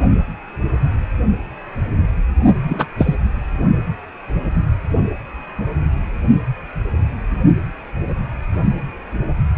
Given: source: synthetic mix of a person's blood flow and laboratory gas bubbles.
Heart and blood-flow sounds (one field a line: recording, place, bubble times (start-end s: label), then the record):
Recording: Doppler ultrasound of blood flow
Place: precordium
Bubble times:
2.68-2.87 s: bubbles
2.98-3.15 s: bubbles
From the record:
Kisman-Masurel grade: 213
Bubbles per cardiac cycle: several, 3 to 8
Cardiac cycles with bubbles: 1 to 10%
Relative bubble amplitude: loud (0.450 to 0.775)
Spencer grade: 1 (occasional bubble signal discernible with the cardiac motion signal, with majority of cardiac periods free of bubbles)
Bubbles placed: only in the low amplitude regions of the cardiac cycle